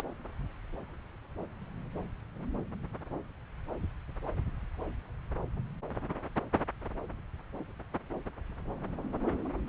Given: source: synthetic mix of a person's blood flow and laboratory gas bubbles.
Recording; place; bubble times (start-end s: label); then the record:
Doppler ultrasound of blood flow; subclavian vein
0.00-0.02 s: bubbles
From the record:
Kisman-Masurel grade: 213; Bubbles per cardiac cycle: several, 3 to 8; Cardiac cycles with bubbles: 1 to 10%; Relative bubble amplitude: loud (0.450 to 0.775); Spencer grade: 1 (occasional bubble signal discernible with the cardiac motion signal, with majority of cardiac periods free of bubbles); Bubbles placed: anywhere in the cardiac cycle